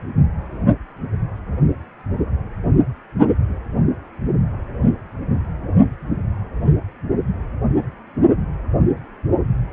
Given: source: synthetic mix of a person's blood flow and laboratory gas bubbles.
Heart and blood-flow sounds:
Doppler ultrasound of blood flow; precordium
no bubbles
From the record:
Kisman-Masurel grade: 000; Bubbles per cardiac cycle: 0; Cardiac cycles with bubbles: 0%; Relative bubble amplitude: no bubbles discernible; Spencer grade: 0 (complete lack of bubble signals)

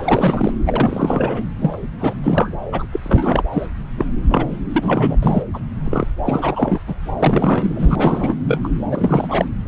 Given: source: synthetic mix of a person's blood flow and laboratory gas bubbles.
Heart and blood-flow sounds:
Doppler ultrasound of blood flow; subclavian vein
0.00-0.53 s: bubbles
0.66-1.43 s: bubbles
1.62-1.78 s: bubbles
2.00-2.13 s: bubbles
2.23-2.54 s: bubbles
2.72-2.86 s: bubbles
2.92-3.00 s: bubbles
3.02-3.43 s: bubbles
3.52-3.67 s: bubbles
3.98-4.05 s: bubbles
4.29-4.46 s: bubbles
4.74-5.16 s: bubbles
5.22-5.44 s: bubbles
5.54-5.59 s: bubbles
5.84-6.07 s: bubbles
6.25-6.80 s: bubbles
6.88-6.95 s: bubbles
7.19-8.35 s: bubbles
8.47-8.61 s: bubbles
8.63-8.69 s: bubbles
8.91-9.45 s: bubbles
From the record:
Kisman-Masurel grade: 342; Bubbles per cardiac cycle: rolling drumbeat, 9 or more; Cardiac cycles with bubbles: 100%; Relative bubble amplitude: moderate (0.250 to 0.450); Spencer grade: 3 (all of the cardiac periods contain showers or single bubble signals, but not dominating or overriding the cardiac motion signals); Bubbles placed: anywhere in the cardiac cycle

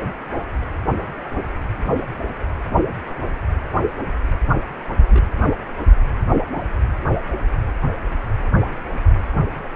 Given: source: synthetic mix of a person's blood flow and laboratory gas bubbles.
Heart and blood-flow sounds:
Doppler ultrasound of blood flow; precordium
5.11-5.23 s: bubbles
From the record:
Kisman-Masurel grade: 111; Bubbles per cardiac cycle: 1 to 2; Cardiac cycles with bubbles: 1 to 10%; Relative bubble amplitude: barely perceptible (0.100 to 0.250); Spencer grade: 1 (occasional bubble signal discernible with the cardiac motion signal, with majority of cardiac periods free of bubbles); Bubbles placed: only in the low amplitude regions of the cardiac cycle

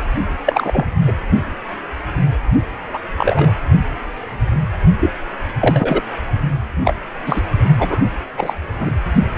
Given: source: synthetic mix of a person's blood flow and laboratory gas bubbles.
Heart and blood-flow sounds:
Doppler ultrasound of blood flow; precordium
0.46-0.86 s: bubbles
1.07-1.12 s: bubbles
2.94-3.00 s: bubbles
3.17-3.56 s: bubbles
4.99-5.10 s: bubbles
5.61-6.02 s: bubbles
6.84-6.95 s: bubbles
7.26-7.40 s: bubbles
7.79-7.98 s: bubbles
8.38-8.61 s: bubbles
8.79-8.92 s: bubbles
From the record:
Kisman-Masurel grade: 233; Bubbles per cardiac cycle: several, 3 to 8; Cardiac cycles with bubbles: 50 to 99%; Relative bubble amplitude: loud (0.450 to 0.775); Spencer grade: 3 (all of the cardiac periods contain showers or single bubble signals, but not dominating or overriding the cardiac motion signals); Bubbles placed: only in the low amplitude regions of the cardiac cycle

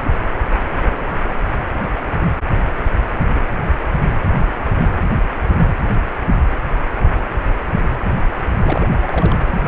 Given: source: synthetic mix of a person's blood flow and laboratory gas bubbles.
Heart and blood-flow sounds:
Doppler ultrasound of blood flow; precordium
8.63-8.91 s: bubbles
9.02-9.37 s: bubbles
9.45-9.62 s: bubbles
From the record:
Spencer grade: 1 (occasional bubble signal discernible with the cardiac motion signal, with majority of cardiac periods free of bubbles); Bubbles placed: anywhere in the cardiac cycle

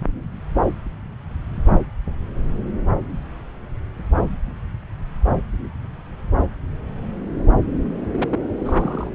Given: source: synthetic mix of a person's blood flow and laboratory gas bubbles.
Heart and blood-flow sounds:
Doppler ultrasound of blood flow; subclavian vein
8.12-8.47 s: bubbles
8.60-9.10 s: bubbles
From the record:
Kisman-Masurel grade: 212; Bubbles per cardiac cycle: several, 3 to 8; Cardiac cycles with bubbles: 1 to 10%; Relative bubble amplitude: moderate (0.250 to 0.450); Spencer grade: 1 (occasional bubble signal discernible with the cardiac motion signal, with majority of cardiac periods free of bubbles); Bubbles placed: anywhere in the cardiac cycle

